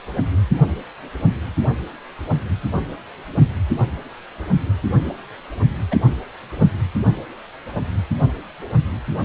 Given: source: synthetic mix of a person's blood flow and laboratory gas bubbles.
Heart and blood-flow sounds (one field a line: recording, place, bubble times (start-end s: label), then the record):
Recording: Doppler ultrasound of blood flow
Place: precordium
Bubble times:
5.91-5.96 s: bubbles
6.60-6.65 s: bubbles
From the record:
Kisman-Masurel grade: 112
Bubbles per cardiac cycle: 1 to 2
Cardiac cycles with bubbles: 1 to 10%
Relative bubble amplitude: moderate (0.250 to 0.450)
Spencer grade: 1 (occasional bubble signal discernible with the cardiac motion signal, with majority of cardiac periods free of bubbles)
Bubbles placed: only in the low amplitude regions of the cardiac cycle